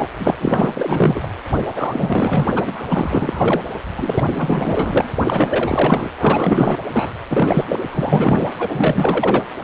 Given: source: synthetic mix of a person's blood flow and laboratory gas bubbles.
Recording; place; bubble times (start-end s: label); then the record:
Doppler ultrasound of blood flow; precordium
0.00-0.08 s: bubbles
0.18-0.35 s: bubbles
0.40-1.28 s: bubbles
1.71-2.82 s: bubbles
2.88-3.61 s: bubbles
3.97-5.10 s: bubbles
5.23-6.11 s: bubbles
6.19-6.77 s: bubbles
6.91-7.12 s: bubbles
7.29-7.65 s: bubbles
7.68-7.79 s: bubbles
7.88-8.47 s: bubbles
8.59-9.43 s: bubbles
From the record:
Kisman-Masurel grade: 444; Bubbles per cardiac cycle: continuous sound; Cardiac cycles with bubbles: 100%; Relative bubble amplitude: maximal (0.775 to 0.999); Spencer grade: 4 (maximum detectable bubble signal sounding continuously throughout systole and diastole of every cardiac period, and overriding the amplitude of the normal cardiac signals); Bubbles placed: anywhere in the cardiac cycle